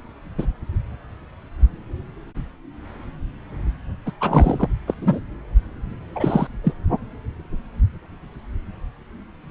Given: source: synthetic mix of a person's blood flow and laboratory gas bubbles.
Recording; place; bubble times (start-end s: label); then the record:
Doppler ultrasound of blood flow; subclavian vein
0.38-0.45 s: bubbles
4.05-4.12 s: bubbles
4.21-4.68 s: bubbles
4.88-4.94 s: bubbles
5.00-5.20 s: bubbles
6.16-6.47 s: bubbles
6.63-6.74 s: bubbles
From the record:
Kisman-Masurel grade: 222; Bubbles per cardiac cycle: several, 3 to 8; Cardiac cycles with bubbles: 10 to 50%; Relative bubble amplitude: moderate (0.250 to 0.450); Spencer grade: 2 (many but less than half of the cardiac periods contain bubble signals, singularly or in groups); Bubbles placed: anywhere in the cardiac cycle